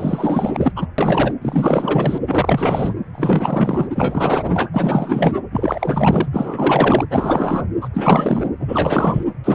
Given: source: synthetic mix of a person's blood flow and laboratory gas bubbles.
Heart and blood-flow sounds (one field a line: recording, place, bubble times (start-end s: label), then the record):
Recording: Doppler ultrasound of blood flow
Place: precordium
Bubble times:
0.00-0.72 s: bubbles
0.75-0.87 s: bubbles
0.98-1.34 s: bubbles
1.41-2.19 s: bubbles
2.27-2.94 s: bubbles
3.12-3.87 s: bubbles
3.90-4.70 s: bubbles
4.72-5.34 s: bubbles
5.52-6.29 s: bubbles
6.31-7.04 s: bubbles
7.10-7.63 s: bubbles
7.81-7.89 s: bubbles
7.94-8.48 s: bubbles
8.59-9.25 s: bubbles
9.44-9.55 s: bubbles
From the record:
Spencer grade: 4 (maximum detectable bubble signal sounding continuously throughout systole and diastole of every cardiac period, and overriding the amplitude of the normal cardiac signals)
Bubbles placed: anywhere in the cardiac cycle